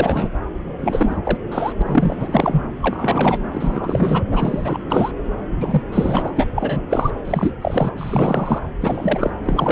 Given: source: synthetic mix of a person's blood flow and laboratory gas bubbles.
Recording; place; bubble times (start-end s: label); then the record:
Doppler ultrasound of blood flow; subclavian vein
0.00-0.28 s: bubbles
0.79-1.17 s: bubbles
1.24-1.38 s: bubbles
1.52-1.73 s: bubbles
1.80-1.83 s: bubbles
1.85-2.64 s: bubbles
2.81-3.40 s: bubbles
3.52-4.25 s: bubbles
4.31-4.79 s: bubbles
4.88-5.12 s: bubbles
5.61-5.82 s: bubbles
5.92-6.32 s: bubbles
6.36-6.46 s: bubbles
6.55-6.82 s: bubbles
6.88-7.11 s: bubbles
7.25-7.53 s: bubbles
7.61-8.62 s: bubbles
8.81-9.30 s: bubbles
9.44-9.72 s: bubbles
From the record:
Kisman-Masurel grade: 332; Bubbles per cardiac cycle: rolling drumbeat, 9 or more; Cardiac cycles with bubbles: 50 to 99%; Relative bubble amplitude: moderate (0.250 to 0.450); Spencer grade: 3 (all of the cardiac periods contain showers or single bubble signals, but not dominating or overriding the cardiac motion signals); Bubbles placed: anywhere in the cardiac cycle